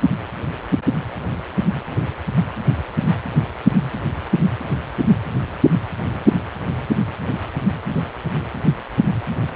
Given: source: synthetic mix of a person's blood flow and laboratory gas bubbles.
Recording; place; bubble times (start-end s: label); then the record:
Doppler ultrasound of blood flow; precordium
no bubbles
From the record:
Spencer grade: 0 (complete lack of bubble signals)